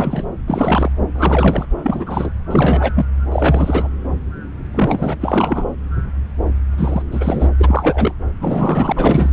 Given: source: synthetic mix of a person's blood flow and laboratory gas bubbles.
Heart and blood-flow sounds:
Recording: Doppler ultrasound of blood flow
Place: subclavian vein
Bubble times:
0.00-0.24 s: bubbles
0.46-0.90 s: bubbles
1.14-1.65 s: bubbles
1.83-2.30 s: bubbles
2.50-2.92 s: bubbles
2.96-3.05 s: bubbles
3.31-3.88 s: bubbles
4.74-5.17 s: bubbles
5.21-5.65 s: bubbles
6.78-7.02 s: bubbles
7.11-7.49 s: bubbles
7.58-8.14 s: bubbles
8.39-8.93 s: bubbles
8.96-9.30 s: bubbles
From the record:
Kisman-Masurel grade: 333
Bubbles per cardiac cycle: rolling drumbeat, 9 or more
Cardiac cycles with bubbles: 50 to 99%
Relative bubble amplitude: loud (0.450 to 0.775)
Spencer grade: 3 (all of the cardiac periods contain showers or single bubble signals, but not dominating or overriding the cardiac motion signals)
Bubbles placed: anywhere in the cardiac cycle

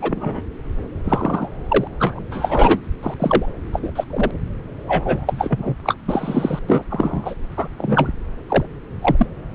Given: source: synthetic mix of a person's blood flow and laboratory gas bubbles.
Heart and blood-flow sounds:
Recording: Doppler ultrasound of blood flow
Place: subclavian vein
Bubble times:
0.02-0.42 s: bubbles
1.04-1.49 s: bubbles
1.68-1.88 s: bubbles
1.98-2.21 s: bubbles
2.31-2.80 s: bubbles
3.03-3.14 s: bubbles
3.19-3.46 s: bubbles
3.72-3.80 s: bubbles
3.83-3.91 s: bubbles
3.95-4.04 s: bubbles
4.10-4.31 s: bubbles
4.87-5.75 s: bubbles
5.83-5.94 s: bubbles
6.08-6.59 s: bubbles
6.68-6.85 s: bubbles
6.89-7.34 s: bubbles
7.56-7.68 s: bubbles
7.78-8.10 s: bubbles
8.48-8.65 s: bubbles
9.01-9.26 s: bubbles
From the record:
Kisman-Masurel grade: 243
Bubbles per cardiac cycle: several, 3 to 8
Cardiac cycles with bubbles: 100%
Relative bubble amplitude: loud (0.450 to 0.775)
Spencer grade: 3 (all of the cardiac periods contain showers or single bubble signals, but not dominating or overriding the cardiac motion signals)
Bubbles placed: anywhere in the cardiac cycle

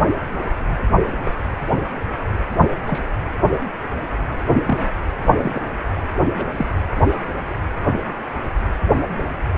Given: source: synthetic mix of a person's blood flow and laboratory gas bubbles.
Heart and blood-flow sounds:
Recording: Doppler ultrasound of blood flow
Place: precordium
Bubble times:
1.24-1.31 s: bubbles
2.50-2.56 s: bubbles
2.87-3.01 s: bubbles
4.66-4.78 s: bubbles
5.37-5.61 s: bubbles
6.30-6.45 s: bubbles
6.57-6.67 s: bubbles
From the record:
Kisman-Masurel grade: 122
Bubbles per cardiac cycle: 1 to 2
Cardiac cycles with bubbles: 10 to 50%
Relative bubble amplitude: moderate (0.250 to 0.450)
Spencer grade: 2 (many but less than half of the cardiac periods contain bubble signals, singularly or in groups)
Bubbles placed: anywhere in the cardiac cycle

